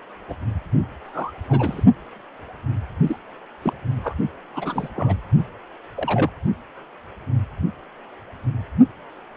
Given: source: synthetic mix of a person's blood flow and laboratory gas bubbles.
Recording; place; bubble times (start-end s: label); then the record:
Doppler ultrasound of blood flow; precordium
0.28-0.35 s: bubbles
1.04-1.84 s: bubbles
3.06-3.17 s: bubbles
3.62-3.74 s: bubbles
4.04-4.15 s: bubbles
4.54-4.89 s: bubbles
4.95-5.15 s: bubbles
5.96-6.30 s: bubbles
From the record:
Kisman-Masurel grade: 221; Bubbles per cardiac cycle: several, 3 to 8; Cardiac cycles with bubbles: 10 to 50%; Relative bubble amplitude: barely perceptible (0.100 to 0.250); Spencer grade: 2 (many but less than half of the cardiac periods contain bubble signals, singularly or in groups); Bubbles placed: only in the low amplitude regions of the cardiac cycle